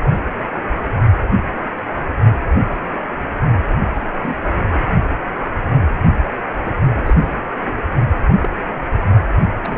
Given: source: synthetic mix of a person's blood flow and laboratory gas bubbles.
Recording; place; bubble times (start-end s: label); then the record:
Doppler ultrasound of blood flow; precordium
3.93-4.01 s: bubbles
4.21-4.37 s: bubbles
6.65-6.71 s: bubbles
7.05-7.14 s: bubbles
8.42-8.50 s: bubbles
9.64-9.78 s: bubbles
From the record:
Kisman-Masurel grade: 121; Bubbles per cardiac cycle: 1 to 2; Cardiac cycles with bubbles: 10 to 50%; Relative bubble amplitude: barely perceptible (0.100 to 0.250); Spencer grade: 2 (many but less than half of the cardiac periods contain bubble signals, singularly or in groups); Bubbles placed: only in the low amplitude regions of the cardiac cycle